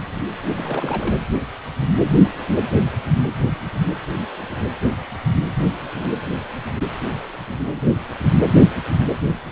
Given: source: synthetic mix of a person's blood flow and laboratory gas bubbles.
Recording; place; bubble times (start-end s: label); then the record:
Doppler ultrasound of blood flow; precordium
0.47-0.54 s: bubbles
0.57-1.19 s: bubbles
From the record:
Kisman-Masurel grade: 211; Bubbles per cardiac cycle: several, 3 to 8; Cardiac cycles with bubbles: 1 to 10%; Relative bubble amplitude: barely perceptible (0.100 to 0.250); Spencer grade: 1 (occasional bubble signal discernible with the cardiac motion signal, with majority of cardiac periods free of bubbles); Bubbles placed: anywhere in the cardiac cycle